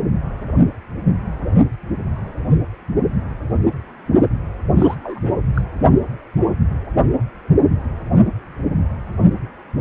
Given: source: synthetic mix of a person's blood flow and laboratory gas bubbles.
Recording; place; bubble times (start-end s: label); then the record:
Doppler ultrasound of blood flow; precordium
4.76-4.96 s: bubbles
5.04-5.32 s: bubbles
5.54-5.62 s: bubbles
From the record:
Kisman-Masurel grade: 211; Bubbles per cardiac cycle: several, 3 to 8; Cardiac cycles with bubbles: 1 to 10%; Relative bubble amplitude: barely perceptible (0.100 to 0.250); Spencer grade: 1 (occasional bubble signal discernible with the cardiac motion signal, with majority of cardiac periods free of bubbles); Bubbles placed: only in the low amplitude regions of the cardiac cycle